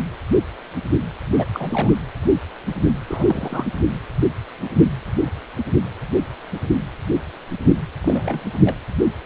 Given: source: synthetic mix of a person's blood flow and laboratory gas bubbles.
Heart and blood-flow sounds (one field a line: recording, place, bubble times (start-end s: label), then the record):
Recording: Doppler ultrasound of blood flow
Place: precordium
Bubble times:
1.33-1.46 s: bubbles
1.53-1.90 s: bubbles
3.06-3.67 s: bubbles
8.03-8.40 s: bubbles
8.60-8.76 s: bubbles
From the record:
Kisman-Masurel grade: 221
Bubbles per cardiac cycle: several, 3 to 8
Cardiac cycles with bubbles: 10 to 50%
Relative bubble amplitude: barely perceptible (0.100 to 0.250)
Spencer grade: 2 (many but less than half of the cardiac periods contain bubble signals, singularly or in groups)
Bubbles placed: anywhere in the cardiac cycle